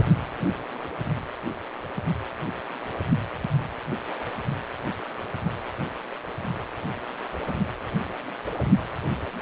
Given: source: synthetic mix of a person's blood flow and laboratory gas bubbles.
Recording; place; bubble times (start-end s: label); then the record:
Doppler ultrasound of blood flow; precordium
no bubbles
From the record:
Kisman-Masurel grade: 000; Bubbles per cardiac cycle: 0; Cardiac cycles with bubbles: 0%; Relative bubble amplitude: no bubbles discernible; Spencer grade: 0 (complete lack of bubble signals)